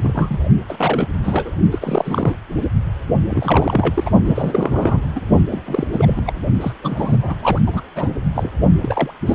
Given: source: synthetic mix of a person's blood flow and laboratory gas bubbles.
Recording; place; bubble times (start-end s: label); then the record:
Doppler ultrasound of blood flow; precordium
0.01-0.40 s: bubbles
0.69-1.07 s: bubbles
1.23-1.52 s: bubbles
1.71-2.34 s: bubbles
3.28-4.09 s: bubbles
4.25-4.97 s: bubbles
5.15-5.20 s: bubbles
5.50-5.62 s: bubbles
5.65-5.87 s: bubbles
5.92-6.33 s: bubbles
6.60-6.72 s: bubbles
6.83-7.35 s: bubbles
7.42-7.61 s: bubbles
7.66-7.82 s: bubbles
7.95-8.09 s: bubbles
8.34-8.50 s: bubbles
8.82-9.13 s: bubbles
9.26-9.35 s: bubbles
From the record:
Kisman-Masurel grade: 342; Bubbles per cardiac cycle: rolling drumbeat, 9 or more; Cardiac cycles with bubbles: 100%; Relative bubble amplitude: moderate (0.250 to 0.450); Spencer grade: 3 (all of the cardiac periods contain showers or single bubble signals, but not dominating or overriding the cardiac motion signals); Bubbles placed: only in the low amplitude regions of the cardiac cycle